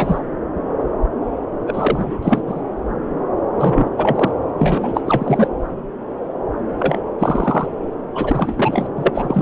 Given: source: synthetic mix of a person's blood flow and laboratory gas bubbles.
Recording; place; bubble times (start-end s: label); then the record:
Doppler ultrasound of blood flow; subclavian vein
0.00-0.21 s: bubbles
1.67-2.42 s: bubbles
2.46-2.63 s: bubbles
3.53-3.88 s: bubbles
3.96-4.31 s: bubbles
4.58-5.01 s: bubbles
5.04-5.47 s: bubbles
6.79-7.01 s: bubbles
7.19-7.68 s: bubbles
8.14-8.88 s: bubbles
8.96-9.12 s: bubbles
9.14-9.42 s: bubbles
From the record:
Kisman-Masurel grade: 333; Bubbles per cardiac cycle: rolling drumbeat, 9 or more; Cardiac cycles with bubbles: 50 to 99%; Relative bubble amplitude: loud (0.450 to 0.775); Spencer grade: 3 (all of the cardiac periods contain showers or single bubble signals, but not dominating or overriding the cardiac motion signals); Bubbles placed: anywhere in the cardiac cycle